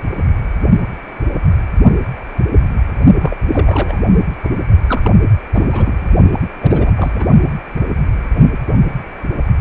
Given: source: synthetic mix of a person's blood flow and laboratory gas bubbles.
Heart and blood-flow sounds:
Doppler ultrasound of blood flow; precordium
3.18-3.37 s: bubbles
3.52-4.00 s: bubbles
4.05-4.16 s: bubbles
4.42-4.50 s: bubbles
4.87-5.12 s: bubbles
5.54-6.07 s: bubbles
6.33-6.39 s: bubbles
6.61-6.92 s: bubbles
6.96-7.10 s: bubbles
7.14-7.25 s: bubbles
From the record:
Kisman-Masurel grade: 332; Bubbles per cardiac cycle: rolling drumbeat, 9 or more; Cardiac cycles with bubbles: 50 to 99%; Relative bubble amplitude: moderate (0.250 to 0.450); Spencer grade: 3 (all of the cardiac periods contain showers or single bubble signals, but not dominating or overriding the cardiac motion signals); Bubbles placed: only in the low amplitude regions of the cardiac cycle

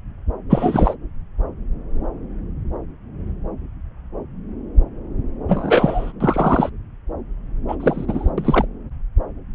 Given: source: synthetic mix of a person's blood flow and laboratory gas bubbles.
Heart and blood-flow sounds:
Doppler ultrasound of blood flow; subclavian vein
0.50-0.95 s: bubbles
5.48-6.12 s: bubbles
6.20-6.70 s: bubbles
7.68-7.76 s: bubbles
7.80-8.30 s: bubbles
8.38-8.65 s: bubbles
From the record:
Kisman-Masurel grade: 223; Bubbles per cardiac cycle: several, 3 to 8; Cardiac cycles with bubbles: 10 to 50%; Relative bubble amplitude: loud (0.450 to 0.775); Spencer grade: 2 (many but less than half of the cardiac periods contain bubble signals, singularly or in groups); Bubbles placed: anywhere in the cardiac cycle

